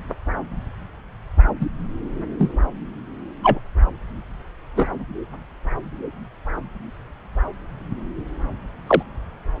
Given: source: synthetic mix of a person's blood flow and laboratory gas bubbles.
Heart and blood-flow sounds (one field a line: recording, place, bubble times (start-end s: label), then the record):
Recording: Doppler ultrasound of blood flow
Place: subclavian vein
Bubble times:
1.60-1.66 s: bubbles
2.39-2.52 s: bubbles
3.43-3.59 s: bubbles
4.76-4.88 s: bubbles
8.87-9.02 s: bubbles
From the record:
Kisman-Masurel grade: 123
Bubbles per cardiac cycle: 1 to 2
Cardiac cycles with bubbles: 10 to 50%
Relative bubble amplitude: loud (0.450 to 0.775)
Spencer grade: 2 (many but less than half of the cardiac periods contain bubble signals, singularly or in groups)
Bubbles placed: anywhere in the cardiac cycle